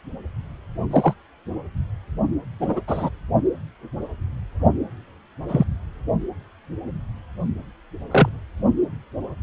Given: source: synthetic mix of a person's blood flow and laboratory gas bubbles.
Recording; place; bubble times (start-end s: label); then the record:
Doppler ultrasound of blood flow; precordium
0.91-1.14 s: bubbles
2.60-2.80 s: bubbles
2.87-3.09 s: bubbles
5.48-5.65 s: bubbles
8.11-8.29 s: bubbles
From the record:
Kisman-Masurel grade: 123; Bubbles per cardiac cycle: 1 to 2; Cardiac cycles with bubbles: 10 to 50%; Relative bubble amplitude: loud (0.450 to 0.775); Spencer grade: 2 (many but less than half of the cardiac periods contain bubble signals, singularly or in groups); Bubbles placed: only in the low amplitude regions of the cardiac cycle